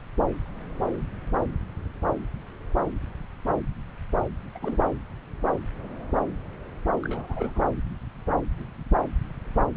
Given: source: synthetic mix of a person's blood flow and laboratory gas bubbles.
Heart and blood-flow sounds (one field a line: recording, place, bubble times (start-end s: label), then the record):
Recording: Doppler ultrasound of blood flow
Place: subclavian vein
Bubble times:
4.55-4.58 s: bubbles
4.61-4.78 s: bubbles
4.83-4.90 s: bubbles
7.03-7.61 s: bubbles
From the record:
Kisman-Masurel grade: 211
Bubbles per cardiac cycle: several, 3 to 8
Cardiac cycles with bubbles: 1 to 10%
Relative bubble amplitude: barely perceptible (0.100 to 0.250)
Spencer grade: 1 (occasional bubble signal discernible with the cardiac motion signal, with majority of cardiac periods free of bubbles)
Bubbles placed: anywhere in the cardiac cycle